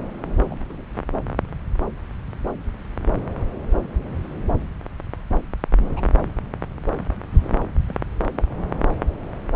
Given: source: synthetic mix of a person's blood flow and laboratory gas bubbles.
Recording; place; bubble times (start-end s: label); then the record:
Doppler ultrasound of blood flow; subclavian vein
0.50-0.56 s: bubbles
0.61-0.85 s: bubbles
5.96-6.01 s: bubbles
7.38-7.55 s: bubbles
7.89-7.94 s: bubbles
8.37-8.42 s: bubbles
From the record:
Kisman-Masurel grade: 121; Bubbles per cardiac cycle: 1 to 2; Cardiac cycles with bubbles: 10 to 50%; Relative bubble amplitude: barely perceptible (0.100 to 0.250); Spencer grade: 2 (many but less than half of the cardiac periods contain bubble signals, singularly or in groups); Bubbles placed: anywhere in the cardiac cycle